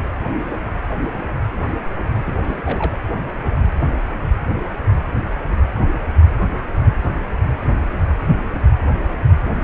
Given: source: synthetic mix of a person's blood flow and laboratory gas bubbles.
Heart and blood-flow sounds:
Doppler ultrasound of blood flow; precordium
2.23-2.36 s: bubbles
2.45-2.98 s: bubbles
From the record:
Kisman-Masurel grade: 211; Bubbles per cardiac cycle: several, 3 to 8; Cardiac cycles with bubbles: 1 to 10%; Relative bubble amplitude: barely perceptible (0.100 to 0.250); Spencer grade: 1 (occasional bubble signal discernible with the cardiac motion signal, with majority of cardiac periods free of bubbles); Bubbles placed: anywhere in the cardiac cycle

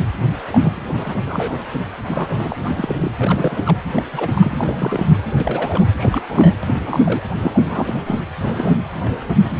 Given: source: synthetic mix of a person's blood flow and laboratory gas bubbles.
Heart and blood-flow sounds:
Doppler ultrasound of blood flow; precordium
0.48-0.80 s: bubbles
0.88-1.19 s: bubbles
1.27-1.62 s: bubbles
2.06-2.57 s: bubbles
2.65-3.12 s: bubbles
3.19-3.78 s: bubbles
3.96-4.03 s: bubbles
4.11-5.06 s: bubbles
5.35-5.92 s: bubbles
5.96-6.22 s: bubbles
6.29-6.57 s: bubbles
6.63-6.80 s: bubbles
6.86-7.01 s: bubbles
7.04-7.22 s: bubbles
7.42-8.03 s: bubbles
8.06-8.21 s: bubbles
8.39-9.01 s: bubbles
9.04-9.35 s: bubbles
9.42-9.60 s: bubbles
From the record:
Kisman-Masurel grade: 342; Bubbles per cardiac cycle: rolling drumbeat, 9 or more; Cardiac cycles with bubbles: 100%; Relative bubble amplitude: moderate (0.250 to 0.450); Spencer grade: 3 (all of the cardiac periods contain showers or single bubble signals, but not dominating or overriding the cardiac motion signals); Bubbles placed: anywhere in the cardiac cycle

